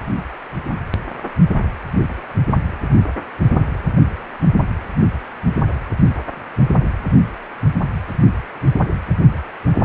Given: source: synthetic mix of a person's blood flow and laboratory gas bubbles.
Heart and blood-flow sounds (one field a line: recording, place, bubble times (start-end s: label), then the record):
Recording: Doppler ultrasound of blood flow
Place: precordium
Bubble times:
no bubbles
From the record:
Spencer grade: 0 (complete lack of bubble signals)